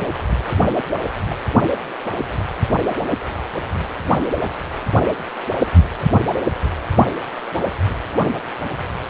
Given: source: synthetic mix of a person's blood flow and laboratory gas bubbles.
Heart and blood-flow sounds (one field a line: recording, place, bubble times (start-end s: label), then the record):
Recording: Doppler ultrasound of blood flow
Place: precordium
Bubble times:
0.00-0.09 s: bubbles
0.47-0.60 s: bubbles
1.27-1.35 s: bubbles
From the record:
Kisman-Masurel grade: 211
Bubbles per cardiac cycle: several, 3 to 8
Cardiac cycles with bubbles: 1 to 10%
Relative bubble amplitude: barely perceptible (0.100 to 0.250)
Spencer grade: 1 (occasional bubble signal discernible with the cardiac motion signal, with majority of cardiac periods free of bubbles)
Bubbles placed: only in the low amplitude regions of the cardiac cycle